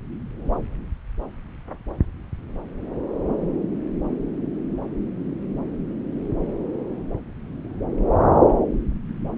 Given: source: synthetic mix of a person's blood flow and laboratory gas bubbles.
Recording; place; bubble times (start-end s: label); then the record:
Doppler ultrasound of blood flow; subclavian vein
no bubbles
From the record:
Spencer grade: 0 (complete lack of bubble signals)